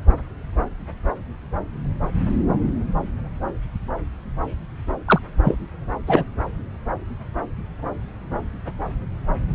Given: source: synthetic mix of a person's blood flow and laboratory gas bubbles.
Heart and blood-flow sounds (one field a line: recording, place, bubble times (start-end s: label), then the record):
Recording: Doppler ultrasound of blood flow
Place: subclavian vein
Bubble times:
5.08-5.20 s: bubbles
5.44-5.58 s: bubbles
6.07-6.24 s: bubbles
From the record:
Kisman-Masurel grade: 213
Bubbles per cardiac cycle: several, 3 to 8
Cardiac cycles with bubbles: 1 to 10%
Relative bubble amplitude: loud (0.450 to 0.775)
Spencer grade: 1 (occasional bubble signal discernible with the cardiac motion signal, with majority of cardiac periods free of bubbles)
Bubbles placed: anywhere in the cardiac cycle